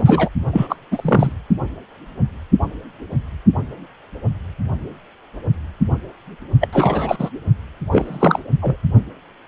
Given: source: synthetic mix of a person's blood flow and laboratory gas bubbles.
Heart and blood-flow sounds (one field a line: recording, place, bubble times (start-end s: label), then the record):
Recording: Doppler ultrasound of blood flow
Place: precordium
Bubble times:
0.00-0.29 s: bubbles
0.53-0.76 s: bubbles
0.91-1.32 s: bubbles
6.61-6.69 s: bubbles
6.73-7.30 s: bubbles
7.92-8.42 s: bubbles
8.62-8.76 s: bubbles
From the record:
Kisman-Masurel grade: 223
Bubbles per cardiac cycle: several, 3 to 8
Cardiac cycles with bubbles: 10 to 50%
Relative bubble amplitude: loud (0.450 to 0.775)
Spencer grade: 2 (many but less than half of the cardiac periods contain bubble signals, singularly or in groups)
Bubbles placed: only in the low amplitude regions of the cardiac cycle